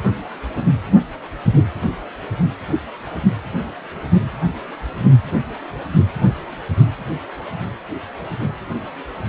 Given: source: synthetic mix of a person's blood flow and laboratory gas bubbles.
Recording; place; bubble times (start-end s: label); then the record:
Doppler ultrasound of blood flow; precordium
no bubbles
From the record:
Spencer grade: 0 (complete lack of bubble signals)